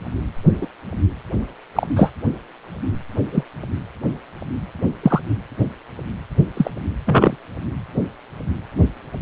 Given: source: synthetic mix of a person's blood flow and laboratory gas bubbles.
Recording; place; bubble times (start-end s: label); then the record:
Doppler ultrasound of blood flow; precordium
0.60-0.67 s: bubbles
1.75-1.87 s: bubbles
1.96-2.11 s: bubbles
3.31-3.43 s: bubbles
5.03-5.21 s: bubbles
6.57-6.71 s: bubbles
7.06-7.36 s: bubbles
From the record:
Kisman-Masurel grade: 123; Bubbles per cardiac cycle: 1 to 2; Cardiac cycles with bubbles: 10 to 50%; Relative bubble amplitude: loud (0.450 to 0.775); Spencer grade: 2 (many but less than half of the cardiac periods contain bubble signals, singularly or in groups); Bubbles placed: anywhere in the cardiac cycle